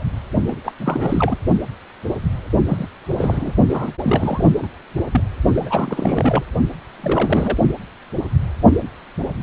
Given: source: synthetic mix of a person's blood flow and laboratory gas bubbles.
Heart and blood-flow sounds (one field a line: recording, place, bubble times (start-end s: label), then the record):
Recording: Doppler ultrasound of blood flow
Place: precordium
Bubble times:
0.00-0.03 s: bubbles
0.46-0.55 s: bubbles
0.64-0.73 s: bubbles
0.79-1.35 s: bubbles
2.67-2.88 s: bubbles
3.16-3.52 s: bubbles
3.68-3.92 s: bubbles
4.00-4.52 s: bubbles
4.58-4.67 s: bubbles
5.12-5.21 s: bubbles
5.54-6.44 s: bubbles
6.96-7.57 s: bubbles
From the record:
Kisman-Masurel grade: 332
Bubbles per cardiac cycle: rolling drumbeat, 9 or more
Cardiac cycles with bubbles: 50 to 99%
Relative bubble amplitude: moderate (0.250 to 0.450)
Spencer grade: 3 (all of the cardiac periods contain showers or single bubble signals, but not dominating or overriding the cardiac motion signals)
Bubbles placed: only in the low amplitude regions of the cardiac cycle